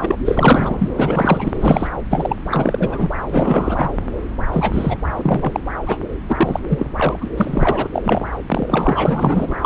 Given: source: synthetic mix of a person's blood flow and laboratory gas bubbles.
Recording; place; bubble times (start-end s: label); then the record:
Doppler ultrasound of blood flow; subclavian vein
0.02-0.22 s: bubbles
0.25-0.89 s: bubbles
0.95-1.88 s: bubbles
2.09-3.10 s: bubbles
3.29-3.89 s: bubbles
4.52-4.99 s: bubbles
5.16-5.60 s: bubbles
5.86-5.98 s: bubbles
6.28-6.59 s: bubbles
6.67-6.86 s: bubbles
6.96-7.27 s: bubbles
7.36-7.88 s: bubbles
7.93-8.24 s: bubbles
8.48-9.55 s: bubbles
9.62-9.66 s: bubbles
From the record:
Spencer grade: 4 (maximum detectable bubble signal sounding continuously throughout systole and diastole of every cardiac period, and overriding the amplitude of the normal cardiac signals); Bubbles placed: anywhere in the cardiac cycle